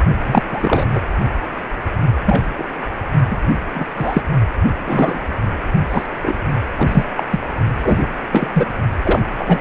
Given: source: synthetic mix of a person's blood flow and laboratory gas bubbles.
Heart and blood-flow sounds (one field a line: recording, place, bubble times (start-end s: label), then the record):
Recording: Doppler ultrasound of blood flow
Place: precordium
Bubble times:
0.26-0.43 s: bubbles
0.52-0.87 s: bubbles
0.94-1.00 s: bubbles
2.25-2.54 s: bubbles
2.58-2.64 s: bubbles
3.30-3.38 s: bubbles
3.74-3.88 s: bubbles
3.95-4.23 s: bubbles
4.86-5.20 s: bubbles
5.91-6.07 s: bubbles
6.22-6.38 s: bubbles
6.79-7.05 s: bubbles
7.16-7.24 s: bubbles
7.30-7.40 s: bubbles
7.82-8.07 s: bubbles
8.32-8.71 s: bubbles
9.03-9.26 s: bubbles
9.38-9.60 s: bubbles
From the record:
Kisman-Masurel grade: 243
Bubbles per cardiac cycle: several, 3 to 8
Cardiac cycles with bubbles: 100%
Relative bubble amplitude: loud (0.450 to 0.775)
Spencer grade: 3 (all of the cardiac periods contain showers or single bubble signals, but not dominating or overriding the cardiac motion signals)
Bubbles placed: only in the low amplitude regions of the cardiac cycle